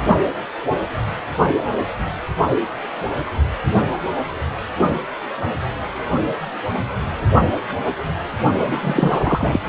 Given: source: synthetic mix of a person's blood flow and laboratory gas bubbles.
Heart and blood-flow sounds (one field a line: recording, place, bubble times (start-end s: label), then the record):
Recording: Doppler ultrasound of blood flow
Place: precordium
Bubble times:
8.53-9.69 s: bubbles
From the record:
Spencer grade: 1 (occasional bubble signal discernible with the cardiac motion signal, with majority of cardiac periods free of bubbles)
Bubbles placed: only in the low amplitude regions of the cardiac cycle